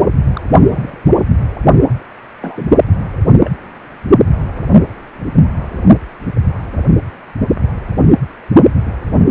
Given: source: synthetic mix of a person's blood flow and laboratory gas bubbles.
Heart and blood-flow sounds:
Doppler ultrasound of blood flow; precordium
0.33-0.41 s: bubbles
0.70-0.97 s: bubbles
2.41-2.70 s: bubbles
3.43-3.52 s: bubbles
From the record:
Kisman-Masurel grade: 121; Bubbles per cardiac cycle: 1 to 2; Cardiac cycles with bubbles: 10 to 50%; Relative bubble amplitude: barely perceptible (0.100 to 0.250); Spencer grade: 2 (many but less than half of the cardiac periods contain bubble signals, singularly or in groups); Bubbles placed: only in the low amplitude regions of the cardiac cycle

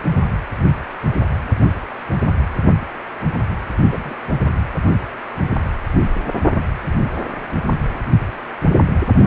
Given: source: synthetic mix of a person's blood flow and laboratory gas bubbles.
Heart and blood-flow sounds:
Doppler ultrasound of blood flow; precordium
3.87-4.14 s: bubbles
From the record:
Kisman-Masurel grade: 112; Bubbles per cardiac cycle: 1 to 2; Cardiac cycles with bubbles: 1 to 10%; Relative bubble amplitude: moderate (0.250 to 0.450); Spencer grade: 1 (occasional bubble signal discernible with the cardiac motion signal, with majority of cardiac periods free of bubbles); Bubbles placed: only in the low amplitude regions of the cardiac cycle

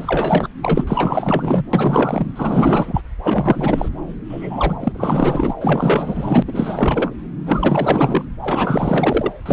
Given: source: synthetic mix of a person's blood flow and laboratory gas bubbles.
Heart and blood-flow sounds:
Doppler ultrasound of blood flow; subclavian vein
0.00-0.48 s: bubbles
0.62-0.84 s: bubbles
0.87-1.64 s: bubbles
1.73-2.31 s: bubbles
2.35-3.01 s: bubbles
3.23-3.89 s: bubbles
4.29-4.76 s: bubbles
4.80-5.54 s: bubbles
5.60-6.43 s: bubbles
6.47-7.11 s: bubbles
7.46-8.25 s: bubbles
8.42-9.32 s: bubbles
9.46-9.52 s: bubbles
From the record:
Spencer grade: 4 (maximum detectable bubble signal sounding continuously throughout systole and diastole of every cardiac period, and overriding the amplitude of the normal cardiac signals); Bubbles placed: anywhere in the cardiac cycle

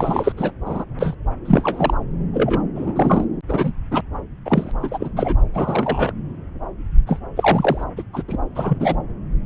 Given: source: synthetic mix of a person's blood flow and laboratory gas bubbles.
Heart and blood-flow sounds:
Doppler ultrasound of blood flow; subclavian vein
0.00-0.32 s: bubbles
0.36-0.52 s: bubbles
0.65-0.85 s: bubbles
0.99-1.15 s: bubbles
1.45-1.94 s: bubbles
2.33-2.61 s: bubbles
2.75-3.25 s: bubbles
3.48-3.72 s: bubbles
3.91-4.01 s: bubbles
4.45-4.71 s: bubbles
4.80-5.10 s: bubbles
5.16-5.36 s: bubbles
5.54-6.12 s: bubbles
7.06-7.19 s: bubbles
7.37-7.83 s: bubbles
7.96-8.03 s: bubbles
8.13-8.22 s: bubbles
8.28-8.38 s: bubbles
8.54-8.96 s: bubbles
From the record:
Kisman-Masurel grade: 233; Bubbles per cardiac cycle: several, 3 to 8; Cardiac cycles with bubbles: 50 to 99%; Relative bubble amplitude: loud (0.450 to 0.775); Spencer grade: 3 (all of the cardiac periods contain showers or single bubble signals, but not dominating or overriding the cardiac motion signals); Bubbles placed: anywhere in the cardiac cycle

